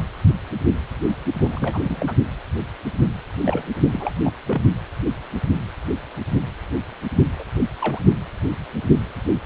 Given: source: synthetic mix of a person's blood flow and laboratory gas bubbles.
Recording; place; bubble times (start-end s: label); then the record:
Doppler ultrasound of blood flow; precordium
1.37-2.15 s: bubbles
3.44-3.63 s: bubbles
3.92-4.11 s: bubbles
4.24-4.32 s: bubbles
4.46-4.62 s: bubbles
7.39-7.45 s: bubbles
7.79-8.01 s: bubbles
From the record:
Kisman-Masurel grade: 222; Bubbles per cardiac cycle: several, 3 to 8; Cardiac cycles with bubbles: 10 to 50%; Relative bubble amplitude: moderate (0.250 to 0.450); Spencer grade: 2 (many but less than half of the cardiac periods contain bubble signals, singularly or in groups); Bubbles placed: only in the low amplitude regions of the cardiac cycle